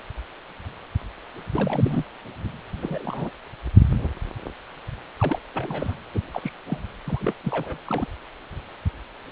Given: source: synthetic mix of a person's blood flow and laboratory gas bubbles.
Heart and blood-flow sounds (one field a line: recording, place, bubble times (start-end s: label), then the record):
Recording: Doppler ultrasound of blood flow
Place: precordium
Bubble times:
1.53-2.04 s: bubbles
2.81-3.30 s: bubbles
5.20-5.39 s: bubbles
5.54-5.94 s: bubbles
6.14-6.21 s: bubbles
6.31-6.53 s: bubbles
6.67-6.79 s: bubbles
7.06-7.33 s: bubbles
7.44-7.77 s: bubbles
7.87-8.06 s: bubbles
From the record:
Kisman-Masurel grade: 221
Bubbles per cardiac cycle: several, 3 to 8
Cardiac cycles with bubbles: 10 to 50%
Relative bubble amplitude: barely perceptible (0.100 to 0.250)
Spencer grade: 2 (many but less than half of the cardiac periods contain bubble signals, singularly or in groups)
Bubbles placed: anywhere in the cardiac cycle